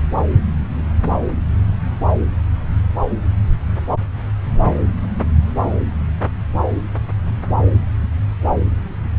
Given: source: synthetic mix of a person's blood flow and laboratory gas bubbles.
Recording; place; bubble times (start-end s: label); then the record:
Doppler ultrasound of blood flow; subclavian vein
no bubbles
From the record:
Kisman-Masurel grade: 000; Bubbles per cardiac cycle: 0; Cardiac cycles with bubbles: 0%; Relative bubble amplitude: no bubbles discernible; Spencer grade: 0 (complete lack of bubble signals)